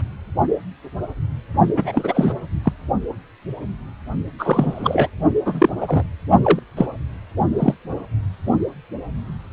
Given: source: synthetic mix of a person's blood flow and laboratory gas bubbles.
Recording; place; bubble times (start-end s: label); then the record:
Doppler ultrasound of blood flow; precordium
0.00-0.03 s: bubbles
1.77-2.33 s: bubbles
2.64-2.73 s: bubbles
4.38-5.08 s: bubbles
5.46-5.70 s: bubbles
5.80-6.03 s: bubbles
6.42-6.59 s: bubbles
6.77-6.86 s: bubbles
7.58-7.75 s: bubbles
From the record:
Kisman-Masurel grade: 233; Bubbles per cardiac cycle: several, 3 to 8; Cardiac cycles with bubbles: 50 to 99%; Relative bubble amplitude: loud (0.450 to 0.775); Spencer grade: 3 (all of the cardiac periods contain showers or single bubble signals, but not dominating or overriding the cardiac motion signals); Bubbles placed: only in the low amplitude regions of the cardiac cycle